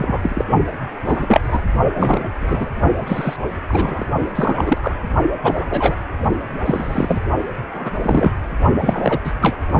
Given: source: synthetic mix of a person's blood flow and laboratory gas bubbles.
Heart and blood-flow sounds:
Doppler ultrasound of blood flow; precordium
0.00-0.45 s: bubbles
1.05-1.60 s: bubbles
1.96-2.29 s: bubbles
2.40-2.70 s: bubbles
3.06-3.37 s: bubbles
3.68-4.06 s: bubbles
4.35-4.78 s: bubbles
4.82-4.97 s: bubbles
5.42-5.67 s: bubbles
5.70-5.95 s: bubbles
6.64-7.21 s: bubbles
7.74-7.91 s: bubbles
8.03-8.30 s: bubbles
8.81-9.19 s: bubbles
9.24-9.32 s: bubbles
9.41-9.56 s: bubbles
From the record:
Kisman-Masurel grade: 243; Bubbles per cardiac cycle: several, 3 to 8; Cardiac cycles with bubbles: 100%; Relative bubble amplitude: loud (0.450 to 0.775); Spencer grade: 3 (all of the cardiac periods contain showers or single bubble signals, but not dominating or overriding the cardiac motion signals); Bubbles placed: only in the low amplitude regions of the cardiac cycle

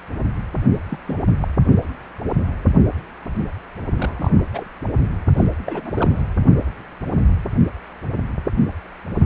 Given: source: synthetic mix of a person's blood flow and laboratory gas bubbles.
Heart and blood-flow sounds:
Doppler ultrasound of blood flow; precordium
0.89-0.99 s: bubbles
1.06-1.19 s: bubbles
1.40-1.48 s: bubbles
3.95-4.46 s: bubbles
4.53-4.69 s: bubbles
4.84-4.91 s: bubbles
5.36-5.45 s: bubbles
5.66-6.23 s: bubbles
From the record:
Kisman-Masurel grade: 221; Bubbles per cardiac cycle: several, 3 to 8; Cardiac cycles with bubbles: 10 to 50%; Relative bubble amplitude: barely perceptible (0.100 to 0.250); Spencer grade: 2 (many but less than half of the cardiac periods contain bubble signals, singularly or in groups); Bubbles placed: only in the low amplitude regions of the cardiac cycle

